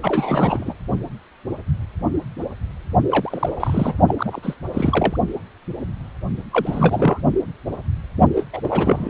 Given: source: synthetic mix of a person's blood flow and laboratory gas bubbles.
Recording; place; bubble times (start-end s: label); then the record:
Doppler ultrasound of blood flow; precordium
0.03-0.74 s: bubbles
3.10-3.94 s: bubbles
4.07-4.15 s: bubbles
4.18-4.39 s: bubbles
4.42-4.57 s: bubbles
4.73-5.17 s: bubbles
6.51-7.21 s: bubbles
8.36-8.45 s: bubbles
8.53-8.61 s: bubbles
8.63-9.10 s: bubbles
From the record:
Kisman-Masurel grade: 332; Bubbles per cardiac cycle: rolling drumbeat, 9 or more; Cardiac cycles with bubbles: 50 to 99%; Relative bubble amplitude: moderate (0.250 to 0.450); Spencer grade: 3 (all of the cardiac periods contain showers or single bubble signals, but not dominating or overriding the cardiac motion signals); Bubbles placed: only in the low amplitude regions of the cardiac cycle